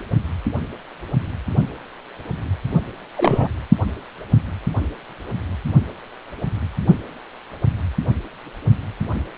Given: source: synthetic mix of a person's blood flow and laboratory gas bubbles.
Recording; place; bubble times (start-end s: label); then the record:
Doppler ultrasound of blood flow; precordium
3.15-3.48 s: bubbles
From the record:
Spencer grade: 1 (occasional bubble signal discernible with the cardiac motion signal, with majority of cardiac periods free of bubbles); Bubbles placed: only in the low amplitude regions of the cardiac cycle